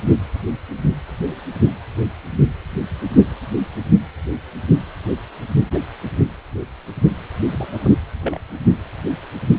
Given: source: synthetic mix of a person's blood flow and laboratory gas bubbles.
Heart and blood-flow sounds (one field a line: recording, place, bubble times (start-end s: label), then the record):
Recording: Doppler ultrasound of blood flow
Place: precordium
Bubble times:
5.74-5.79 s: bubbles
7.51-7.90 s: bubbles
8.21-8.38 s: bubbles
8.71-8.76 s: bubbles
From the record:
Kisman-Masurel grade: 121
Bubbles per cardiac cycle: 1 to 2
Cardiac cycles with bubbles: 10 to 50%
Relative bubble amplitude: barely perceptible (0.100 to 0.250)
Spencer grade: 2 (many but less than half of the cardiac periods contain bubble signals, singularly or in groups)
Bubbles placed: anywhere in the cardiac cycle